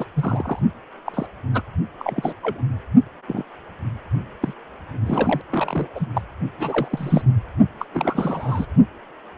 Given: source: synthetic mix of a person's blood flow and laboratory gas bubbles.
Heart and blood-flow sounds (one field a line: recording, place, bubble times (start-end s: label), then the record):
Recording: Doppler ultrasound of blood flow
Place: precordium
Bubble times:
0.00-0.06 s: bubbles
0.15-0.59 s: bubbles
1.06-1.27 s: bubbles
1.54-1.61 s: bubbles
1.98-2.33 s: bubbles
2.42-2.61 s: bubbles
3.27-3.44 s: bubbles
4.42-4.54 s: bubbles
5.06-5.42 s: bubbles
5.50-5.87 s: bubbles
5.95-6.07 s: bubbles
6.14-6.22 s: bubbles
6.58-7.22 s: bubbles
7.79-7.85 s: bubbles
7.93-8.66 s: bubbles
From the record:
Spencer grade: 3 (all of the cardiac periods contain showers or single bubble signals, but not dominating or overriding the cardiac motion signals)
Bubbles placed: only in the low amplitude regions of the cardiac cycle